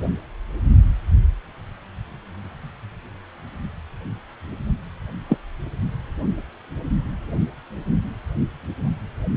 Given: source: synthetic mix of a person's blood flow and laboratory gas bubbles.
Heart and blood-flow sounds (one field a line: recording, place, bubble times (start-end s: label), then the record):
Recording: Doppler ultrasound of blood flow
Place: precordium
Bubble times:
5.29-5.38 s: bubbles
From the record:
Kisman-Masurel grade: 112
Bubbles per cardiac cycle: 1 to 2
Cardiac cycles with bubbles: 1 to 10%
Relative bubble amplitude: moderate (0.250 to 0.450)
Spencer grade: 1 (occasional bubble signal discernible with the cardiac motion signal, with majority of cardiac periods free of bubbles)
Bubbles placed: only in the low amplitude regions of the cardiac cycle